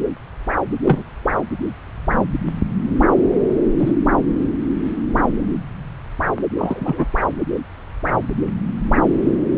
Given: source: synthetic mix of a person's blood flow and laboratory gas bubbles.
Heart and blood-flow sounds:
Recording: Doppler ultrasound of blood flow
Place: subclavian vein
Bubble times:
0.83-1.04 s: bubbles
3.79-3.93 s: bubbles
6.57-7.05 s: bubbles
From the record:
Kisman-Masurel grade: 123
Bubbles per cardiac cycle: 1 to 2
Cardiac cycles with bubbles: 10 to 50%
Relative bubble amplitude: loud (0.450 to 0.775)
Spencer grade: 2 (many but less than half of the cardiac periods contain bubble signals, singularly or in groups)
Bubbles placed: anywhere in the cardiac cycle

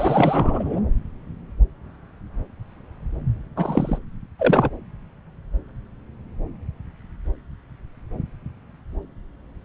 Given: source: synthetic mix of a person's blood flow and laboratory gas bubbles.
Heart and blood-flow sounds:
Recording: Doppler ultrasound of blood flow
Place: subclavian vein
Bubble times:
0.00-0.81 s: bubbles
3.56-3.98 s: bubbles
4.38-4.70 s: bubbles
From the record:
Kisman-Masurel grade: 223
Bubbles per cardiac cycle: several, 3 to 8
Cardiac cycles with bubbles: 10 to 50%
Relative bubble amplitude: loud (0.450 to 0.775)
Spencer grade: 2 (many but less than half of the cardiac periods contain bubble signals, singularly or in groups)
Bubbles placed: anywhere in the cardiac cycle

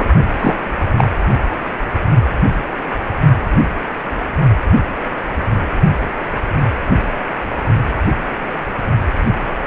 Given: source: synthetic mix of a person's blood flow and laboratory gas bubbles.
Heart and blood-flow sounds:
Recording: Doppler ultrasound of blood flow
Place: precordium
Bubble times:
0.00-0.05 s: bubbles
0.40-0.55 s: bubbles
0.97-1.07 s: bubbles
From the record:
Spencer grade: 2 (many but less than half of the cardiac periods contain bubble signals, singularly or in groups)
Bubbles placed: only in the low amplitude regions of the cardiac cycle

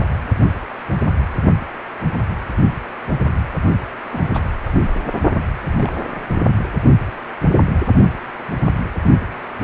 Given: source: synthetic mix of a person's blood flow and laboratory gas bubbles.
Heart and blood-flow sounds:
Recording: Doppler ultrasound of blood flow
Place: precordium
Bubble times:
3.97-4.00 s: bubbles
4.04-4.45 s: bubbles
4.65-5.02 s: bubbles
5.64-5.93 s: bubbles
6.08-6.38 s: bubbles
From the record:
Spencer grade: 2 (many but less than half of the cardiac periods contain bubble signals, singularly or in groups)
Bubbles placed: only in the low amplitude regions of the cardiac cycle

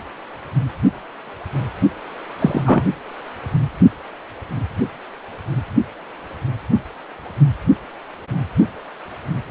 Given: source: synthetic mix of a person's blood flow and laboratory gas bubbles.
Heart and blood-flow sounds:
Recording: Doppler ultrasound of blood flow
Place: precordium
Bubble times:
2.39-2.62 s: bubbles
2.65-2.82 s: bubbles
From the record:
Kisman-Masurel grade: 113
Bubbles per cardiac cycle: 1 to 2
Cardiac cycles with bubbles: 1 to 10%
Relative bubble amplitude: loud (0.450 to 0.775)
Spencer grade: 1 (occasional bubble signal discernible with the cardiac motion signal, with majority of cardiac periods free of bubbles)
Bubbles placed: only in the low amplitude regions of the cardiac cycle

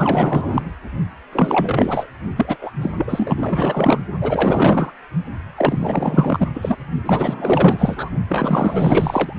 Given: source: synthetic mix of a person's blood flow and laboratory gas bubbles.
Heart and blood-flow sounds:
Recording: Doppler ultrasound of blood flow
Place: precordium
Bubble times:
0.00-0.72 s: bubbles
1.32-2.06 s: bubbles
2.36-2.56 s: bubbles
2.61-2.71 s: bubbles
2.81-2.91 s: bubbles
2.95-3.99 s: bubbles
4.21-4.92 s: bubbles
5.56-6.48 s: bubbles
6.55-6.76 s: bubbles
7.03-8.10 s: bubbles
8.28-9.33 s: bubbles
From the record:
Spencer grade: 4 (maximum detectable bubble signal sounding continuously throughout systole and diastole of every cardiac period, and overriding the amplitude of the normal cardiac signals)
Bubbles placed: only in the low amplitude regions of the cardiac cycle

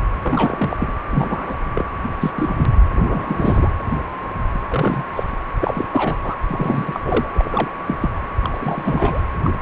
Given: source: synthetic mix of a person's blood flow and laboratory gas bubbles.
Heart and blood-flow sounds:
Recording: Doppler ultrasound of blood flow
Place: precordium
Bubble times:
0.22-0.93 s: bubbles
1.10-1.56 s: bubbles
1.75-1.89 s: bubbles
2.21-2.31 s: bubbles
2.36-2.71 s: bubbles
2.94-3.71 s: bubbles
4.68-5.04 s: bubbles
5.16-5.23 s: bubbles
5.60-5.86 s: bubbles
5.92-6.17 s: bubbles
6.23-6.35 s: bubbles
6.48-7.00 s: bubbles
7.03-7.28 s: bubbles
7.34-7.48 s: bubbles
7.51-7.71 s: bubbles
7.87-7.97 s: bubbles
8.02-8.09 s: bubbles
8.42-9.21 s: bubbles
9.44-9.53 s: bubbles
From the record:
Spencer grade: 3 (all of the cardiac periods contain showers or single bubble signals, but not dominating or overriding the cardiac motion signals)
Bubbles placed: anywhere in the cardiac cycle

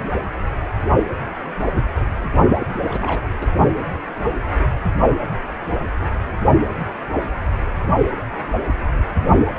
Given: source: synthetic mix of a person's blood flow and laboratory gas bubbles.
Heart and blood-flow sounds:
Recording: Doppler ultrasound of blood flow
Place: precordium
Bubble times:
2.59-2.67 s: bubbles
2.90-3.22 s: bubbles
3.41-3.52 s: bubbles
From the record:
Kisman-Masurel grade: 211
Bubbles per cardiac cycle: several, 3 to 8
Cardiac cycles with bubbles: 1 to 10%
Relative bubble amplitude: barely perceptible (0.100 to 0.250)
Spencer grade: 1 (occasional bubble signal discernible with the cardiac motion signal, with majority of cardiac periods free of bubbles)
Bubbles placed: only in the low amplitude regions of the cardiac cycle

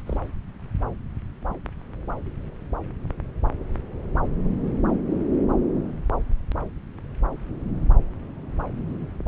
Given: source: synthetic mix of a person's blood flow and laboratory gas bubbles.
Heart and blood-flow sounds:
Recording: Doppler ultrasound of blood flow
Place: subclavian vein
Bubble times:
0.00-0.02 s: bubbles
0.06-0.20 s: bubbles
From the record:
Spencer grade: 1 (occasional bubble signal discernible with the cardiac motion signal, with majority of cardiac periods free of bubbles)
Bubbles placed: anywhere in the cardiac cycle

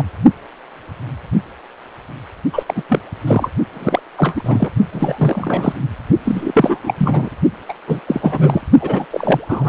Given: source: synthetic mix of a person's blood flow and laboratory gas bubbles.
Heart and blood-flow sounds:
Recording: Doppler ultrasound of blood flow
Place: precordium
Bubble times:
0.00-0.03 s: bubbles
2.52-2.63 s: bubbles
2.67-2.83 s: bubbles
2.89-3.01 s: bubbles
3.27-3.50 s: bubbles
3.73-4.00 s: bubbles
4.18-4.71 s: bubbles
4.92-5.73 s: bubbles
6.24-6.95 s: bubbles
6.98-7.29 s: bubbles
7.69-7.73 s: bubbles
7.87-8.00 s: bubbles
8.07-8.61 s: bubbles
8.79-9.05 s: bubbles
9.11-9.69 s: bubbles
From the record:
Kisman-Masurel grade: 333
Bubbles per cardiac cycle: rolling drumbeat, 9 or more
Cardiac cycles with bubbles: 50 to 99%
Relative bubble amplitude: loud (0.450 to 0.775)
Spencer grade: 3 (all of the cardiac periods contain showers or single bubble signals, but not dominating or overriding the cardiac motion signals)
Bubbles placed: only in the low amplitude regions of the cardiac cycle

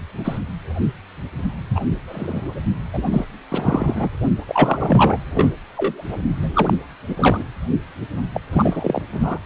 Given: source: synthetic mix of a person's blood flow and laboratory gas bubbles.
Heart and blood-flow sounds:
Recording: Doppler ultrasound of blood flow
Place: precordium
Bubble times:
0.23-0.39 s: bubbles
1.75-1.81 s: bubbles
2.07-2.49 s: bubbles
2.93-3.04 s: bubbles
3.12-3.25 s: bubbles
3.49-4.09 s: bubbles
4.48-5.17 s: bubbles
5.34-5.51 s: bubbles
5.75-6.06 s: bubbles
6.12-6.18 s: bubbles
6.41-6.74 s: bubbles
7.08-7.43 s: bubbles
8.33-8.41 s: bubbles
8.52-9.02 s: bubbles
9.11-9.39 s: bubbles
From the record:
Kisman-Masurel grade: 233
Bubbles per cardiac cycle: several, 3 to 8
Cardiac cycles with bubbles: 50 to 99%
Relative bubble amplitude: loud (0.450 to 0.775)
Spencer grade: 3 (all of the cardiac periods contain showers or single bubble signals, but not dominating or overriding the cardiac motion signals)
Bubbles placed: anywhere in the cardiac cycle

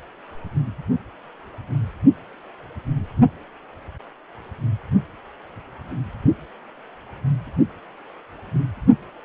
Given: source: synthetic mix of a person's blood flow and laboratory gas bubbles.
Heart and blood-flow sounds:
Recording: Doppler ultrasound of blood flow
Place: precordium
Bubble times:
no bubbles
From the record:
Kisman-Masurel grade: 000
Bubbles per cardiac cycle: 0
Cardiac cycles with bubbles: 0%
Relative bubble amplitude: no bubbles discernible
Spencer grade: 0 (complete lack of bubble signals)

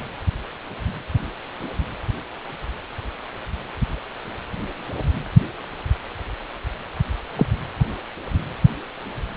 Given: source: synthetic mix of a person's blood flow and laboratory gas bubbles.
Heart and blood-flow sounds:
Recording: Doppler ultrasound of blood flow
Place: precordium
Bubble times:
7.36-7.46 s: bubbles
From the record:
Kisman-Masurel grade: 113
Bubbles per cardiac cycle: 1 to 2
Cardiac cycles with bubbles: 1 to 10%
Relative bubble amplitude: loud (0.450 to 0.775)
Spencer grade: 1 (occasional bubble signal discernible with the cardiac motion signal, with majority of cardiac periods free of bubbles)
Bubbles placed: only in the low amplitude regions of the cardiac cycle

